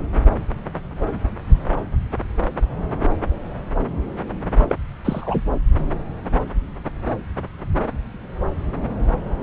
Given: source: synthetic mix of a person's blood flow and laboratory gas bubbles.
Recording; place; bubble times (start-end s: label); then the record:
Doppler ultrasound of blood flow; subclavian vein
4.60-4.66 s: bubbles
4.69-4.75 s: bubbles
5.04-5.41 s: bubbles
From the record:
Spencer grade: 2 (many but less than half of the cardiac periods contain bubble signals, singularly or in groups); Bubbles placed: anywhere in the cardiac cycle